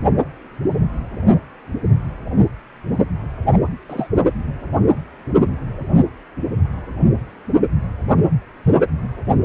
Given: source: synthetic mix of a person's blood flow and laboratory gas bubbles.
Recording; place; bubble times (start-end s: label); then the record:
Doppler ultrasound of blood flow; precordium
3.52-3.58 s: bubbles
3.90-4.07 s: bubbles
From the record:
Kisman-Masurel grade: 112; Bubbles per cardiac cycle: 1 to 2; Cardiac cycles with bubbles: 1 to 10%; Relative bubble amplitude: moderate (0.250 to 0.450); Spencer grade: 1 (occasional bubble signal discernible with the cardiac motion signal, with majority of cardiac periods free of bubbles); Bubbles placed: only in the low amplitude regions of the cardiac cycle